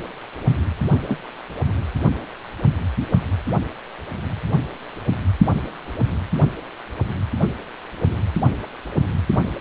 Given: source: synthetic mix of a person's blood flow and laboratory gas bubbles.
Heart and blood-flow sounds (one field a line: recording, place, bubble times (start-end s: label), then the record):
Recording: Doppler ultrasound of blood flow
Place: precordium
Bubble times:
1.07-1.19 s: bubbles
From the record:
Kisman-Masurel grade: 112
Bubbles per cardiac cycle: 1 to 2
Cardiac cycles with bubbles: 1 to 10%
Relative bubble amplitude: moderate (0.250 to 0.450)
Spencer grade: 1 (occasional bubble signal discernible with the cardiac motion signal, with majority of cardiac periods free of bubbles)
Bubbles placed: anywhere in the cardiac cycle